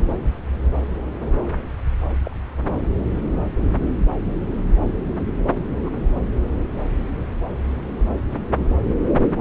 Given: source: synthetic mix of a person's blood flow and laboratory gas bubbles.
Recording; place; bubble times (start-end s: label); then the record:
Doppler ultrasound of blood flow; subclavian vein
2.25-2.36 s: bubbles
5.85-5.89 s: bubbles
From the record:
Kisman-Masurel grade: 121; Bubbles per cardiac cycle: 1 to 2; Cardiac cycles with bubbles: 10 to 50%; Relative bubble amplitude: barely perceptible (0.100 to 0.250); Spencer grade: 2 (many but less than half of the cardiac periods contain bubble signals, singularly or in groups); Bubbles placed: anywhere in the cardiac cycle